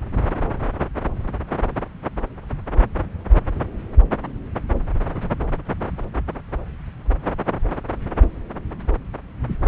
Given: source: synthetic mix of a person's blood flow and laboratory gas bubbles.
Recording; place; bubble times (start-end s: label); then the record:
Doppler ultrasound of blood flow; subclavian vein
no bubbles
From the record:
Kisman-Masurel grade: 000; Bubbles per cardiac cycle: 0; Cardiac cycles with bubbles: 0%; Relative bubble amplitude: no bubbles discernible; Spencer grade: 0 (complete lack of bubble signals)